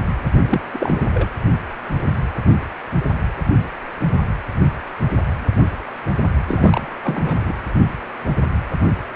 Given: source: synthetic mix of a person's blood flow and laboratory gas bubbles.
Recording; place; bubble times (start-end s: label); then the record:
Doppler ultrasound of blood flow; precordium
0.42-0.61 s: bubbles
0.73-1.09 s: bubbles
1.14-1.29 s: bubbles
6.47-6.98 s: bubbles
7.03-7.53 s: bubbles
From the record:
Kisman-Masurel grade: 222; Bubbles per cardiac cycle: several, 3 to 8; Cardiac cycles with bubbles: 10 to 50%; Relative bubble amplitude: moderate (0.250 to 0.450); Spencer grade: 2 (many but less than half of the cardiac periods contain bubble signals, singularly or in groups); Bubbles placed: anywhere in the cardiac cycle